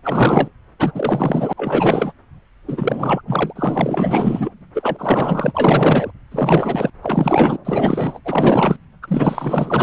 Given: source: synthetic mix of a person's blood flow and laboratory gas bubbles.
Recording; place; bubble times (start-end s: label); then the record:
Doppler ultrasound of blood flow; subclavian vein
0.04-0.48 s: bubbles
0.79-1.53 s: bubbles
1.57-2.13 s: bubbles
2.68-3.22 s: bubbles
3.27-4.51 s: bubbles
4.74-6.10 s: bubbles
6.31-6.90 s: bubbles
7.02-7.57 s: bubbles
7.64-8.19 s: bubbles
8.24-8.76 s: bubbles
9.02-9.83 s: bubbles
From the record:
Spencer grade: 4 (maximum detectable bubble signal sounding continuously throughout systole and diastole of every cardiac period, and overriding the amplitude of the normal cardiac signals); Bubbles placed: anywhere in the cardiac cycle